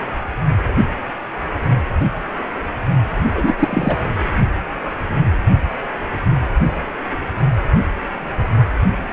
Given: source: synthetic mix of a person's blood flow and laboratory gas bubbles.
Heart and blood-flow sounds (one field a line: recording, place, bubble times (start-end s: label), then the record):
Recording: Doppler ultrasound of blood flow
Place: precordium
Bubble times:
3.34-3.54 s: bubbles
3.59-3.96 s: bubbles
From the record:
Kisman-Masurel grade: 213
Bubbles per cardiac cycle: several, 3 to 8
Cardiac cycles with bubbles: 1 to 10%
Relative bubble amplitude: loud (0.450 to 0.775)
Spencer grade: 1 (occasional bubble signal discernible with the cardiac motion signal, with majority of cardiac periods free of bubbles)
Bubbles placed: anywhere in the cardiac cycle